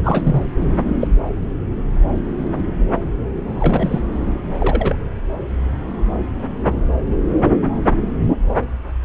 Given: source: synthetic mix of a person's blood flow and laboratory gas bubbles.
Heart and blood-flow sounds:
Doppler ultrasound of blood flow; subclavian vein
0.03-0.50 s: bubbles
1.01-1.07 s: bubbles
3.48-4.01 s: bubbles
4.59-4.96 s: bubbles
From the record:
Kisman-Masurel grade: 222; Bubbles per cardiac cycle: several, 3 to 8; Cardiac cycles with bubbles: 10 to 50%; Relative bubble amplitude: moderate (0.250 to 0.450); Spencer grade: 2 (many but less than half of the cardiac periods contain bubble signals, singularly or in groups); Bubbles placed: anywhere in the cardiac cycle

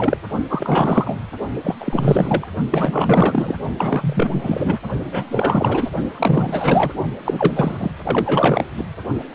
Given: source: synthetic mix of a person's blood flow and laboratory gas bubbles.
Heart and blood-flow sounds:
Doppler ultrasound of blood flow; precordium
0.00-0.17 s: bubbles
0.49-1.15 s: bubbles
1.64-1.75 s: bubbles
1.79-2.48 s: bubbles
2.71-3.55 s: bubbles
3.79-4.79 s: bubbles
5.12-5.25 s: bubbles
5.31-5.92 s: bubbles
6.12-6.92 s: bubbles
7.25-7.92 s: bubbles
8.04-8.64 s: bubbles
8.77-8.85 s: bubbles
9.32-9.35 s: bubbles
From the record:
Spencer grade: 4 (maximum detectable bubble signal sounding continuously throughout systole and diastole of every cardiac period, and overriding the amplitude of the normal cardiac signals); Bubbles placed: only in the low amplitude regions of the cardiac cycle

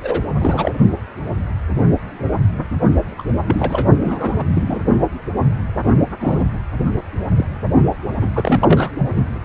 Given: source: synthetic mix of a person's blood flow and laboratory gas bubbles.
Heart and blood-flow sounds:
Doppler ultrasound of blood flow; precordium
0.02-0.22 s: bubbles
0.39-0.72 s: bubbles
3.18-3.23 s: bubbles
3.47-3.86 s: bubbles
4.04-4.43 s: bubbles
4.54-4.84 s: bubbles
6.20-6.44 s: bubbles
7.36-7.46 s: bubbles
8.21-8.30 s: bubbles
8.34-8.91 s: bubbles
9.12-9.39 s: bubbles
From the record:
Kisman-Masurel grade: 232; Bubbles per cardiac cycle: several, 3 to 8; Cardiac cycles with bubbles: 50 to 99%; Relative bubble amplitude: moderate (0.250 to 0.450); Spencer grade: 3 (all of the cardiac periods contain showers or single bubble signals, but not dominating or overriding the cardiac motion signals); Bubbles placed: only in the low amplitude regions of the cardiac cycle

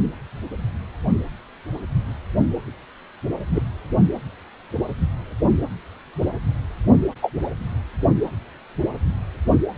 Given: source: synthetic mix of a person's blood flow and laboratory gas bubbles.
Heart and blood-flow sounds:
Doppler ultrasound of blood flow; precordium
3.55-3.62 s: bubbles
7.22-7.33 s: bubbles
From the record:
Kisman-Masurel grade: 123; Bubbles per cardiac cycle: 1 to 2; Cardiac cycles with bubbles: 10 to 50%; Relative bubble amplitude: loud (0.450 to 0.775); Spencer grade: 2 (many but less than half of the cardiac periods contain bubble signals, singularly or in groups); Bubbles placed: only in the low amplitude regions of the cardiac cycle

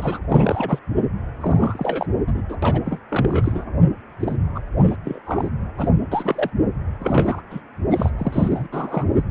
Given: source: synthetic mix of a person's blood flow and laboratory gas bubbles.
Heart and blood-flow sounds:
Doppler ultrasound of blood flow; precordium
0.00-0.20 s: bubbles
0.29-0.79 s: bubbles
1.40-2.06 s: bubbles
2.27-2.43 s: bubbles
2.49-2.57 s: bubbles
2.62-2.81 s: bubbles
2.85-2.99 s: bubbles
3.08-3.65 s: bubbles
4.19-4.36 s: bubbles
4.54-4.60 s: bubbles
4.77-4.96 s: bubbles
5.03-5.19 s: bubbles
5.26-5.50 s: bubbles
5.77-5.88 s: bubbles
6.11-6.50 s: bubbles
7.00-7.42 s: bubbles
7.50-7.61 s: bubbles
7.91-8.12 s: bubbles
8.18-8.68 s: bubbles
8.71-9.05 s: bubbles
9.12-9.24 s: bubbles
From the record:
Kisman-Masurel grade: 342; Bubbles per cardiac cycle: rolling drumbeat, 9 or more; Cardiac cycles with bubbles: 100%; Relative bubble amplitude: moderate (0.250 to 0.450); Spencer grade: 3 (all of the cardiac periods contain showers or single bubble signals, but not dominating or overriding the cardiac motion signals); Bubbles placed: anywhere in the cardiac cycle

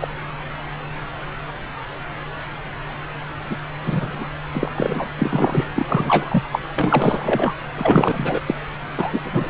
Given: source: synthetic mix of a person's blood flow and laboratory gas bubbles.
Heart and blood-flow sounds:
Doppler ultrasound of blood flow; subclavian vein
0.00-0.08 s: bubbles
3.50-3.57 s: bubbles
3.86-4.25 s: bubbles
4.53-4.68 s: bubbles
4.75-5.10 s: bubbles
5.18-5.66 s: bubbles
5.75-6.43 s: bubbles
6.52-6.59 s: bubbles
6.78-7.54 s: bubbles
7.77-8.40 s: bubbles
8.46-8.55 s: bubbles
8.97-9.20 s: bubbles
9.23-9.50 s: bubbles
From the record:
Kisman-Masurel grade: 333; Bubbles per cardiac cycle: rolling drumbeat, 9 or more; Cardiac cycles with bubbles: 50 to 99%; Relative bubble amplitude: loud (0.450 to 0.775); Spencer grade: 3 (all of the cardiac periods contain showers or single bubble signals, but not dominating or overriding the cardiac motion signals); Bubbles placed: anywhere in the cardiac cycle

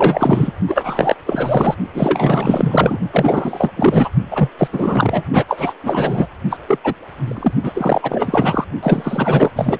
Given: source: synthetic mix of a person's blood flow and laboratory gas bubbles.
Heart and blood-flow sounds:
Doppler ultrasound of blood flow; precordium
0.00-0.52 s: bubbles
0.68-1.15 s: bubbles
1.27-1.75 s: bubbles
1.94-2.98 s: bubbles
3.11-3.69 s: bubbles
3.76-4.08 s: bubbles
4.31-4.50 s: bubbles
4.58-4.67 s: bubbles
4.72-5.24 s: bubbles
5.32-5.46 s: bubbles
5.48-5.74 s: bubbles
5.83-6.26 s: bubbles
6.50-6.58 s: bubbles
6.67-6.79 s: bubbles
6.83-6.94 s: bubbles
7.25-7.54 s: bubbles
7.63-7.72 s: bubbles
7.75-8.65 s: bubbles
8.82-9.52 s: bubbles
9.56-9.79 s: bubbles
From the record:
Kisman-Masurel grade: 444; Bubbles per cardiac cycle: continuous sound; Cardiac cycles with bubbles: 100%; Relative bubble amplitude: maximal (0.775 to 0.999); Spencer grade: 4 (maximum detectable bubble signal sounding continuously throughout systole and diastole of every cardiac period, and overriding the amplitude of the normal cardiac signals); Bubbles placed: only in the low amplitude regions of the cardiac cycle

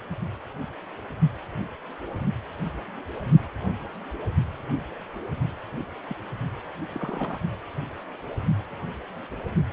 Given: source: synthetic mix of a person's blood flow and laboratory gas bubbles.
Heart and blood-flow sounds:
Doppler ultrasound of blood flow; precordium
6.10-6.16 s: bubbles
6.94-7.41 s: bubbles
From the record:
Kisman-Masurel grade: 221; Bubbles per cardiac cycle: several, 3 to 8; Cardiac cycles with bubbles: 10 to 50%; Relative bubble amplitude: barely perceptible (0.100 to 0.250); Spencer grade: 2 (many but less than half of the cardiac periods contain bubble signals, singularly or in groups); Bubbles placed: only in the low amplitude regions of the cardiac cycle

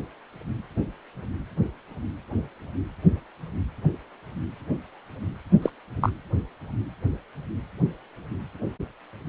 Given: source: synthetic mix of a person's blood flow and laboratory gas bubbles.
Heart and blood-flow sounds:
Doppler ultrasound of blood flow; precordium
5.62-5.70 s: bubbles
6.01-6.09 s: bubbles
From the record:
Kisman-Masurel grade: 123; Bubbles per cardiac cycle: 1 to 2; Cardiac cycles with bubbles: 10 to 50%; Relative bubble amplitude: loud (0.450 to 0.775); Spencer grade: 2 (many but less than half of the cardiac periods contain bubble signals, singularly or in groups); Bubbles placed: only in the low amplitude regions of the cardiac cycle

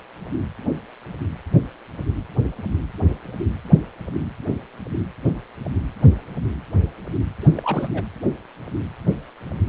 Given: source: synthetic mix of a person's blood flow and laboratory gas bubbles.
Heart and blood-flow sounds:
Doppler ultrasound of blood flow; precordium
7.41-8.04 s: bubbles
From the record:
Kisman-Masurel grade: 211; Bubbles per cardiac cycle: several, 3 to 8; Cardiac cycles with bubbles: 1 to 10%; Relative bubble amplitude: barely perceptible (0.100 to 0.250); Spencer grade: 1 (occasional bubble signal discernible with the cardiac motion signal, with majority of cardiac periods free of bubbles); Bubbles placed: anywhere in the cardiac cycle

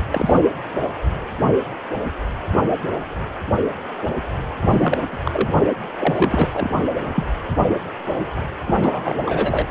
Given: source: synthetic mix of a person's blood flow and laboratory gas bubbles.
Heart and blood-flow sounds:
Doppler ultrasound of blood flow; precordium
0.10-0.41 s: bubbles
4.68-4.98 s: bubbles
5.12-5.19 s: bubbles
5.24-5.54 s: bubbles
6.00-6.48 s: bubbles
6.52-6.71 s: bubbles
7.14-7.24 s: bubbles
8.66-8.75 s: bubbles
8.81-9.19 s: bubbles
9.25-9.66 s: bubbles
From the record:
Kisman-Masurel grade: 333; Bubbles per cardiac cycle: rolling drumbeat, 9 or more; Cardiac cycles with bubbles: 50 to 99%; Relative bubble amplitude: loud (0.450 to 0.775); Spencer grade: 3 (all of the cardiac periods contain showers or single bubble signals, but not dominating or overriding the cardiac motion signals); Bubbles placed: anywhere in the cardiac cycle

